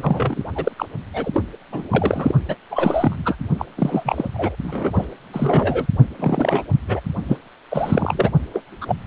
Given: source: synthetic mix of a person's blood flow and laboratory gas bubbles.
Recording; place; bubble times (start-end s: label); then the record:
Doppler ultrasound of blood flow; precordium
0.00-0.43 s: bubbles
0.55-0.72 s: bubbles
0.78-0.86 s: bubbles
1.13-1.43 s: bubbles
1.72-2.34 s: bubbles
2.48-2.56 s: bubbles
2.70-3.35 s: bubbles
3.58-3.66 s: bubbles
3.77-4.28 s: bubbles
4.33-4.55 s: bubbles
4.63-5.05 s: bubbles
5.33-5.86 s: bubbles
6.19-6.63 s: bubbles
6.88-7.00 s: bubbles
7.27-7.37 s: bubbles
7.70-8.30 s: bubbles
8.53-8.63 s: bubbles
8.81-8.96 s: bubbles
From the record:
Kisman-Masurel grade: 343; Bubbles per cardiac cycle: rolling drumbeat, 9 or more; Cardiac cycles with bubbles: 100%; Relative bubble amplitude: loud (0.450 to 0.775); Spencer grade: 3 (all of the cardiac periods contain showers or single bubble signals, but not dominating or overriding the cardiac motion signals); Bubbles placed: only in the low amplitude regions of the cardiac cycle